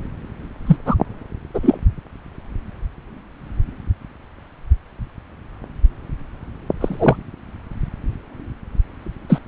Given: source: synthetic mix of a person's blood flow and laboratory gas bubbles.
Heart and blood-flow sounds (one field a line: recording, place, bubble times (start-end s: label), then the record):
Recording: Doppler ultrasound of blood flow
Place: subclavian vein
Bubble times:
0.66-0.76 s: bubbles
0.85-0.95 s: bubbles
1.54-1.59 s: bubbles
1.62-1.78 s: bubbles
6.81-7.17 s: bubbles
9.29-9.38 s: bubbles
From the record:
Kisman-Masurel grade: 123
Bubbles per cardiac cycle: 1 to 2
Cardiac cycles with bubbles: 10 to 50%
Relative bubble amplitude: loud (0.450 to 0.775)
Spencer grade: 2 (many but less than half of the cardiac periods contain bubble signals, singularly or in groups)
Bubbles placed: anywhere in the cardiac cycle